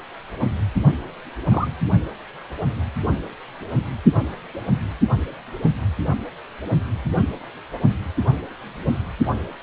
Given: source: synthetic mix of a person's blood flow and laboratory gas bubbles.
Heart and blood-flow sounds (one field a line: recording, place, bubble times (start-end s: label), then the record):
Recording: Doppler ultrasound of blood flow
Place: precordium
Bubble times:
1.50-1.68 s: bubbles
From the record:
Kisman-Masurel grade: 112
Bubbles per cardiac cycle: 1 to 2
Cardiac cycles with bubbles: 1 to 10%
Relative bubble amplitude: moderate (0.250 to 0.450)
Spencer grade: 1 (occasional bubble signal discernible with the cardiac motion signal, with majority of cardiac periods free of bubbles)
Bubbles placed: only in the low amplitude regions of the cardiac cycle